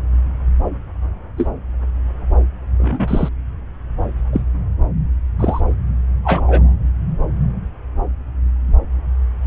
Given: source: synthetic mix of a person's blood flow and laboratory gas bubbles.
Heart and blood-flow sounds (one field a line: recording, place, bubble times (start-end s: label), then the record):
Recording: Doppler ultrasound of blood flow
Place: subclavian vein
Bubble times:
1.37-1.48 s: bubbles
2.77-3.29 s: bubbles
4.32-4.41 s: bubbles
5.39-5.61 s: bubbles
6.23-6.73 s: bubbles
From the record:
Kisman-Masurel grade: 123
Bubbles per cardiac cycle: 1 to 2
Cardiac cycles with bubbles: 10 to 50%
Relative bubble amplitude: loud (0.450 to 0.775)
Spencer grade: 2 (many but less than half of the cardiac periods contain bubble signals, singularly or in groups)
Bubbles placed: anywhere in the cardiac cycle